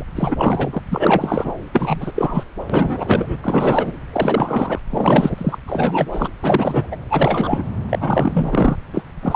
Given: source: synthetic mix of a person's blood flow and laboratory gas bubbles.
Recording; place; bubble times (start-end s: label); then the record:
Doppler ultrasound of blood flow; subclavian vein
0.00-0.04 s: bubbles
0.15-0.36 s: bubbles
0.39-0.81 s: bubbles
0.91-1.52 s: bubbles
1.74-2.12 s: bubbles
2.15-2.44 s: bubbles
2.69-3.36 s: bubbles
3.43-3.92 s: bubbles
4.12-4.79 s: bubbles
4.89-5.57 s: bubbles
5.67-6.29 s: bubbles
6.42-6.87 s: bubbles
6.92-6.96 s: bubbles
7.10-7.62 s: bubbles
7.89-8.76 s: bubbles
8.93-9.03 s: bubbles
9.22-9.36 s: bubbles
From the record:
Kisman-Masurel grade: 342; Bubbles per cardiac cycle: rolling drumbeat, 9 or more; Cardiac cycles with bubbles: 100%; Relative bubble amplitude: moderate (0.250 to 0.450); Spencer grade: 3 (all of the cardiac periods contain showers or single bubble signals, but not dominating or overriding the cardiac motion signals); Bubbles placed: anywhere in the cardiac cycle